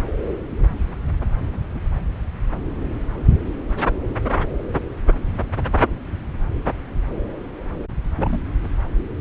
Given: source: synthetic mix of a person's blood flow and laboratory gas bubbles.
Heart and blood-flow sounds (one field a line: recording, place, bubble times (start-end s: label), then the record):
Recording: Doppler ultrasound of blood flow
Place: subclavian vein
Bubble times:
1.73-1.79 s: bubbles
8.18-8.40 s: bubbles
From the record:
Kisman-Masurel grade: 121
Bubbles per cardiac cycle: 1 to 2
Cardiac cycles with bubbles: 10 to 50%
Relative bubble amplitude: barely perceptible (0.100 to 0.250)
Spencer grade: 2 (many but less than half of the cardiac periods contain bubble signals, singularly or in groups)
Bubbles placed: anywhere in the cardiac cycle